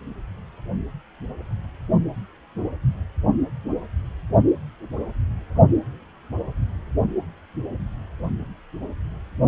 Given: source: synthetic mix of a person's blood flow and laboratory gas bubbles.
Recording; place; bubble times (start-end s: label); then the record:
Doppler ultrasound of blood flow; precordium
no bubbles
From the record:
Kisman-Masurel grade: 000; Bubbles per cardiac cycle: 0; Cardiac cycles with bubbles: 0%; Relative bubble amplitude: no bubbles discernible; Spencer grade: 0 (complete lack of bubble signals)